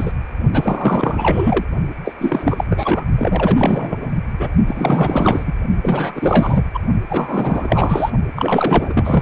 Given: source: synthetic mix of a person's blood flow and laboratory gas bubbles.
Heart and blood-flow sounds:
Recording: Doppler ultrasound of blood flow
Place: precordium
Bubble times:
0.00-0.12 s: bubbles
0.53-1.65 s: bubbles
2.04-2.15 s: bubbles
2.18-2.65 s: bubbles
2.70-3.04 s: bubbles
3.17-4.10 s: bubbles
4.39-4.49 s: bubbles
4.67-5.54 s: bubbles
5.82-6.65 s: bubbles
6.74-6.79 s: bubbles
7.10-8.11 s: bubbles
8.36-9.21 s: bubbles
From the record:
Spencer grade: 4 (maximum detectable bubble signal sounding continuously throughout systole and diastole of every cardiac period, and overriding the amplitude of the normal cardiac signals)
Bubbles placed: only in the low amplitude regions of the cardiac cycle

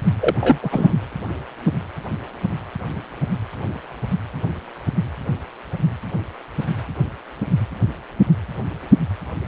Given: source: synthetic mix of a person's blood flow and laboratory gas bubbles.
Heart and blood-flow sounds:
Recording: Doppler ultrasound of blood flow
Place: precordium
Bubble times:
0.20-0.34 s: bubbles
0.40-0.59 s: bubbles
0.62-0.93 s: bubbles
From the record:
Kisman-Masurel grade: 222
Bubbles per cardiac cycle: several, 3 to 8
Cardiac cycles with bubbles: 10 to 50%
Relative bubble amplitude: moderate (0.250 to 0.450)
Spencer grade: 2 (many but less than half of the cardiac periods contain bubble signals, singularly or in groups)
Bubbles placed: anywhere in the cardiac cycle

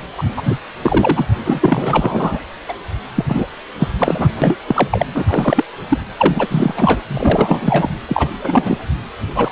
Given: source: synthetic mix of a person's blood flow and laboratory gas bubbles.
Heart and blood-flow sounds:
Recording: Doppler ultrasound of blood flow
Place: precordium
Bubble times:
0.17-0.23 s: bubbles
0.36-0.58 s: bubbles
0.82-1.27 s: bubbles
1.44-2.40 s: bubbles
2.68-2.73 s: bubbles
3.15-3.46 s: bubbles
3.78-3.88 s: bubbles
3.98-4.29 s: bubbles
4.42-4.56 s: bubbles
4.68-5.06 s: bubbles
5.15-5.25 s: bubbles
5.28-5.65 s: bubbles
5.89-5.99 s: bubbles
6.17-6.74 s: bubbles
6.77-7.02 s: bubbles
7.08-7.90 s: bubbles
8.08-8.29 s: bubbles
8.43-8.78 s: bubbles
9.34-9.52 s: bubbles
From the record:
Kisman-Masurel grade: 343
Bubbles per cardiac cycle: rolling drumbeat, 9 or more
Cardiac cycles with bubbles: 100%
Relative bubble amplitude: loud (0.450 to 0.775)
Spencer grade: 3 (all of the cardiac periods contain showers or single bubble signals, but not dominating or overriding the cardiac motion signals)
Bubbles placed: anywhere in the cardiac cycle

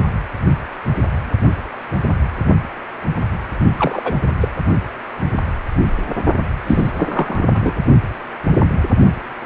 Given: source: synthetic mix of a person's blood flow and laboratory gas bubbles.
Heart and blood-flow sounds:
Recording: Doppler ultrasound of blood flow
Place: precordium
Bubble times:
3.77-4.18 s: bubbles
4.41-4.49 s: bubbles
6.67-6.91 s: bubbles
6.97-7.48 s: bubbles
7.53-7.75 s: bubbles
From the record:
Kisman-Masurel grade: 222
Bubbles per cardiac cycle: several, 3 to 8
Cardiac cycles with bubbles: 10 to 50%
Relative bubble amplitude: moderate (0.250 to 0.450)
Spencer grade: 2 (many but less than half of the cardiac periods contain bubble signals, singularly or in groups)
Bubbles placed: only in the low amplitude regions of the cardiac cycle

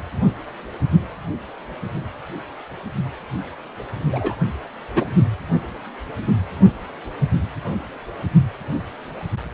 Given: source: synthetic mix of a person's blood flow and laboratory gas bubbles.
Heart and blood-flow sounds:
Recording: Doppler ultrasound of blood flow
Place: precordium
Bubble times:
4.12-4.36 s: bubbles
4.96-5.05 s: bubbles
From the record:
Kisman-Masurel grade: 123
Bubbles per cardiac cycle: 1 to 2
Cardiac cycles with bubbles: 10 to 50%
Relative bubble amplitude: loud (0.450 to 0.775)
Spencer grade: 2 (many but less than half of the cardiac periods contain bubble signals, singularly or in groups)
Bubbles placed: only in the low amplitude regions of the cardiac cycle

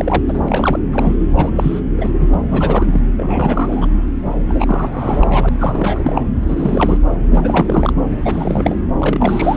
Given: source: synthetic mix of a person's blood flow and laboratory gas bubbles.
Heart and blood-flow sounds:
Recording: Doppler ultrasound of blood flow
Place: subclavian vein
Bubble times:
0.00-0.23 s: bubbles
0.28-0.39 s: bubbles
0.48-0.79 s: bubbles
0.93-1.14 s: bubbles
1.35-1.52 s: bubbles
1.56-1.81 s: bubbles
1.98-2.10 s: bubbles
2.20-2.27 s: bubbles
2.34-2.40 s: bubbles
2.48-3.01 s: bubbles
3.17-3.88 s: bubbles
4.48-5.49 s: bubbles
5.59-6.21 s: bubbles
6.41-6.44 s: bubbles
6.48-6.98 s: bubbles
7.30-7.92 s: bubbles
8.22-8.78 s: bubbles
8.99-9.57 s: bubbles
From the record:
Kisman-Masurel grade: 342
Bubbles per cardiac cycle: rolling drumbeat, 9 or more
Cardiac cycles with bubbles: 100%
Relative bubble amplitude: moderate (0.250 to 0.450)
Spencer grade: 3 (all of the cardiac periods contain showers or single bubble signals, but not dominating or overriding the cardiac motion signals)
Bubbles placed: anywhere in the cardiac cycle

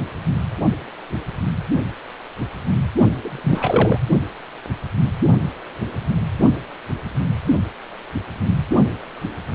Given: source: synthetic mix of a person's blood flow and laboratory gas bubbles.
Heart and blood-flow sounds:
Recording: Doppler ultrasound of blood flow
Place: precordium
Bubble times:
3.22-3.98 s: bubbles
From the record:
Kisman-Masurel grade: 223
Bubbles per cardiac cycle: several, 3 to 8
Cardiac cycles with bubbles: 10 to 50%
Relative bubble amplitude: loud (0.450 to 0.775)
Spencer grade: 2 (many but less than half of the cardiac periods contain bubble signals, singularly or in groups)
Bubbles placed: only in the low amplitude regions of the cardiac cycle

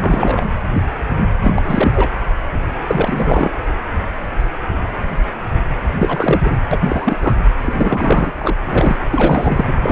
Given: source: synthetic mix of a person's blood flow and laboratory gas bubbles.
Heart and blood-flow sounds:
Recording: Doppler ultrasound of blood flow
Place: precordium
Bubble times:
0.00-0.45 s: bubbles
1.43-1.93 s: bubbles
1.95-2.10 s: bubbles
2.87-3.50 s: bubbles
5.99-6.41 s: bubbles
6.44-6.56 s: bubbles
6.71-7.17 s: bubbles
7.22-7.33 s: bubbles
7.62-8.55 s: bubbles
8.63-8.96 s: bubbles
9.10-9.74 s: bubbles
9.83-9.92 s: bubbles
From the record:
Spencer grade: 3 (all of the cardiac periods contain showers or single bubble signals, but not dominating or overriding the cardiac motion signals)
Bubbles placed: anywhere in the cardiac cycle

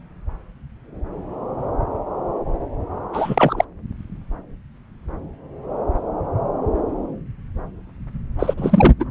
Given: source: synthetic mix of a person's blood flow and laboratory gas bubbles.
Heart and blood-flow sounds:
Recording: Doppler ultrasound of blood flow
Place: subclavian vein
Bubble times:
3.12-3.65 s: bubbles
8.38-8.54 s: bubbles
8.57-8.93 s: bubbles
8.99-9.04 s: bubbles
From the record:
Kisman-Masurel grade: 223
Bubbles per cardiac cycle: several, 3 to 8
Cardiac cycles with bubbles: 10 to 50%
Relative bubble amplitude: loud (0.450 to 0.775)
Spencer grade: 2 (many but less than half of the cardiac periods contain bubble signals, singularly or in groups)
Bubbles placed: anywhere in the cardiac cycle

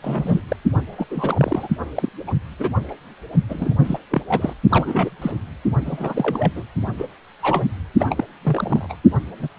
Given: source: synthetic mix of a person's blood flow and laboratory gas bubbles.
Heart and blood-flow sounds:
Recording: Doppler ultrasound of blood flow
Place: precordium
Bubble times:
0.01-0.41 s: bubbles
0.48-0.57 s: bubbles
0.97-1.06 s: bubbles
1.10-1.68 s: bubbles
1.95-2.09 s: bubbles
2.27-2.33 s: bubbles
2.59-2.74 s: bubbles
2.88-2.95 s: bubbles
3.49-3.75 s: bubbles
3.84-3.98 s: bubbles
4.10-4.22 s: bubbles
4.28-4.53 s: bubbles
4.69-5.10 s: bubbles
5.21-5.31 s: bubbles
5.85-6.51 s: bubbles
6.55-6.64 s: bubbles
6.98-7.06 s: bubbles
7.42-7.65 s: bubbles
7.98-8.24 s: bubbles
8.42-8.95 s: bubbles
9.38-9.48 s: bubbles
From the record:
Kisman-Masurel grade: 242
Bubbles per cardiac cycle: several, 3 to 8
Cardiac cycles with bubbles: 100%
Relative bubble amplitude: moderate (0.250 to 0.450)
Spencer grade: 3 (all of the cardiac periods contain showers or single bubble signals, but not dominating or overriding the cardiac motion signals)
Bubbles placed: only in the low amplitude regions of the cardiac cycle

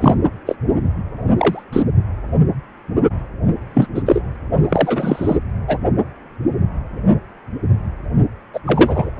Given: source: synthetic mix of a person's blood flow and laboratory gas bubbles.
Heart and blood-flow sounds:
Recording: Doppler ultrasound of blood flow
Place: precordium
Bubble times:
0.00-0.14 s: bubbles
0.46-0.55 s: bubbles
1.37-1.63 s: bubbles
1.72-1.83 s: bubbles
3.73-3.87 s: bubbles
3.94-4.02 s: bubbles
4.06-4.21 s: bubbles
4.69-5.37 s: bubbles
5.67-5.78 s: bubbles
8.54-8.60 s: bubbles
8.66-9.10 s: bubbles
From the record:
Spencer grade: 2 (many but less than half of the cardiac periods contain bubble signals, singularly or in groups)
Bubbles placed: only in the low amplitude regions of the cardiac cycle

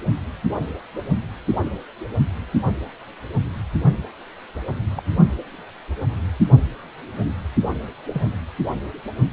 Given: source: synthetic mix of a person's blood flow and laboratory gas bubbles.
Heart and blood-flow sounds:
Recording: Doppler ultrasound of blood flow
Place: precordium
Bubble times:
4.95-5.03 s: bubbles
8.12-8.30 s: bubbles
From the record:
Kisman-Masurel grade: 121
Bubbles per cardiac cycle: 1 to 2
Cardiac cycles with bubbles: 10 to 50%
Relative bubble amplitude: barely perceptible (0.100 to 0.250)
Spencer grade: 2 (many but less than half of the cardiac periods contain bubble signals, singularly or in groups)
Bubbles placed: only in the low amplitude regions of the cardiac cycle

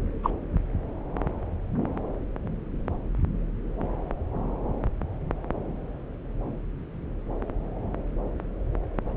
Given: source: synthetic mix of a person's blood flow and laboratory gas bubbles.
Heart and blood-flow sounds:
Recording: Doppler ultrasound of blood flow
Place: subclavian vein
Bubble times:
0.23-0.30 s: bubbles
From the record:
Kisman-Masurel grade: 112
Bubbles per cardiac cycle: 1 to 2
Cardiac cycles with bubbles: 1 to 10%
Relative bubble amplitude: moderate (0.250 to 0.450)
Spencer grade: 1 (occasional bubble signal discernible with the cardiac motion signal, with majority of cardiac periods free of bubbles)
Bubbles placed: anywhere in the cardiac cycle

